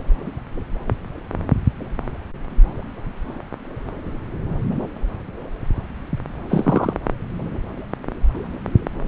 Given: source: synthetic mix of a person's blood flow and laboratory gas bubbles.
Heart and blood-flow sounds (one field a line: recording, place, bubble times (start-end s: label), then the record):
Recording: Doppler ultrasound of blood flow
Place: subclavian vein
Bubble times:
6.49-6.93 s: bubbles
From the record:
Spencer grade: 1 (occasional bubble signal discernible with the cardiac motion signal, with majority of cardiac periods free of bubbles)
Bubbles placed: anywhere in the cardiac cycle